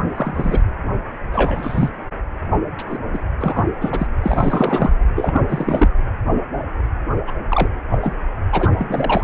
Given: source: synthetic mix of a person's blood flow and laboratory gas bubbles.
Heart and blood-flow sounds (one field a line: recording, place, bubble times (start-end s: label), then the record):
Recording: Doppler ultrasound of blood flow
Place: precordium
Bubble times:
0.15-0.63 s: bubbles
1.33-1.90 s: bubbles
2.78-2.83 s: bubbles
2.90-2.98 s: bubbles
3.13-3.20 s: bubbles
3.40-3.66 s: bubbles
3.81-4.07 s: bubbles
4.23-4.92 s: bubbles
5.16-5.42 s: bubbles
5.49-5.88 s: bubbles
7.27-7.32 s: bubbles
7.50-7.68 s: bubbles
7.90-7.99 s: bubbles
8.02-8.14 s: bubbles
8.51-8.69 s: bubbles
8.71-9.24 s: bubbles
From the record:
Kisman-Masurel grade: 232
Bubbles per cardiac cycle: several, 3 to 8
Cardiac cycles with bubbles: 50 to 99%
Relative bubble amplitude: moderate (0.250 to 0.450)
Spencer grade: 3 (all of the cardiac periods contain showers or single bubble signals, but not dominating or overriding the cardiac motion signals)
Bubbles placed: anywhere in the cardiac cycle